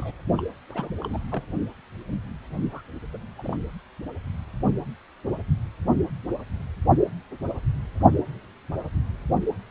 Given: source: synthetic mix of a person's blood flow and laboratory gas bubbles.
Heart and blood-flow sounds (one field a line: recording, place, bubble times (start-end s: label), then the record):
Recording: Doppler ultrasound of blood flow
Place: precordium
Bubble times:
0.00-0.11 s: bubbles
0.38-0.43 s: bubbles
0.69-0.90 s: bubbles
1.01-1.19 s: bubbles
1.31-1.42 s: bubbles
2.72-2.81 s: bubbles
3.13-3.17 s: bubbles
3.38-3.57 s: bubbles
From the record:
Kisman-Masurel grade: 221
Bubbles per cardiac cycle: several, 3 to 8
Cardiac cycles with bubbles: 10 to 50%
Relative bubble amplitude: barely perceptible (0.100 to 0.250)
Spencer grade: 2 (many but less than half of the cardiac periods contain bubble signals, singularly or in groups)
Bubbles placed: only in the low amplitude regions of the cardiac cycle